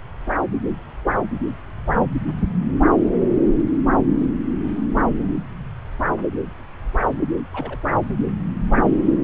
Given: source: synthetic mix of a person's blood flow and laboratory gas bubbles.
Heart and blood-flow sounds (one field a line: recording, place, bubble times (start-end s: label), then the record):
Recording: Doppler ultrasound of blood flow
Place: subclavian vein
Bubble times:
7.52-7.79 s: bubbles
From the record:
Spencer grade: 1 (occasional bubble signal discernible with the cardiac motion signal, with majority of cardiac periods free of bubbles)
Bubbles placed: anywhere in the cardiac cycle